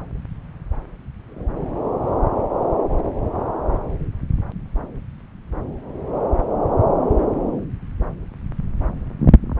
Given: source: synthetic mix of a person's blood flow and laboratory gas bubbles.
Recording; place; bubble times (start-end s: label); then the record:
Doppler ultrasound of blood flow; subclavian vein
no bubbles
From the record:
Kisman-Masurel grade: 000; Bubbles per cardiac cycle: 0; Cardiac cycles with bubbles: 0%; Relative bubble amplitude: no bubbles discernible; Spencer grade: 0 (complete lack of bubble signals)